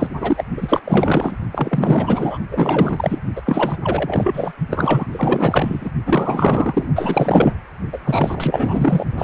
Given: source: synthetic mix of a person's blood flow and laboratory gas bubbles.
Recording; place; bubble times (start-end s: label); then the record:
Doppler ultrasound of blood flow; precordium
0.00-0.07 s: bubbles
0.19-0.44 s: bubbles
0.56-0.80 s: bubbles
0.84-1.36 s: bubbles
1.52-2.38 s: bubbles
2.51-3.19 s: bubbles
3.35-3.42 s: bubbles
3.46-3.76 s: bubbles
3.83-4.52 s: bubbles
4.70-5.06 s: bubbles
5.12-5.90 s: bubbles
6.06-6.88 s: bubbles
6.96-7.54 s: bubbles
7.92-7.99 s: bubbles
8.02-9.05 s: bubbles
9.18-9.24 s: bubbles
From the record:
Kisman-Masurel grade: 444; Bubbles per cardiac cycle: continuous sound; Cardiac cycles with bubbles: 100%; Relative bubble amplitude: maximal (0.775 to 0.999); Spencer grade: 4 (maximum detectable bubble signal sounding continuously throughout systole and diastole of every cardiac period, and overriding the amplitude of the normal cardiac signals); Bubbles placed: only in the low amplitude regions of the cardiac cycle